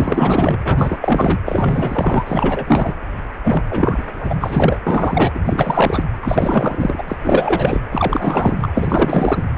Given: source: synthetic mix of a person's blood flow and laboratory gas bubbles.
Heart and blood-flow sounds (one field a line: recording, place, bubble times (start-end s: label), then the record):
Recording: Doppler ultrasound of blood flow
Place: precordium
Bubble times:
0.00-0.58 s: bubbles
0.65-0.97 s: bubbles
1.01-1.42 s: bubbles
1.46-2.94 s: bubbles
3.43-3.63 s: bubbles
3.70-4.80 s: bubbles
4.87-5.32 s: bubbles
5.35-5.40 s: bubbles
5.44-6.04 s: bubbles
6.22-7.03 s: bubbles
7.08-7.17 s: bubbles
7.24-7.81 s: bubbles
7.92-8.68 s: bubbles
8.74-9.44 s: bubbles
9.55-9.58 s: bubbles
From the record:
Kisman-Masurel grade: 444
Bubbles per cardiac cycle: continuous sound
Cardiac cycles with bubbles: 100%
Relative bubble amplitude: maximal (0.775 to 0.999)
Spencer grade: 4 (maximum detectable bubble signal sounding continuously throughout systole and diastole of every cardiac period, and overriding the amplitude of the normal cardiac signals)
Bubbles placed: anywhere in the cardiac cycle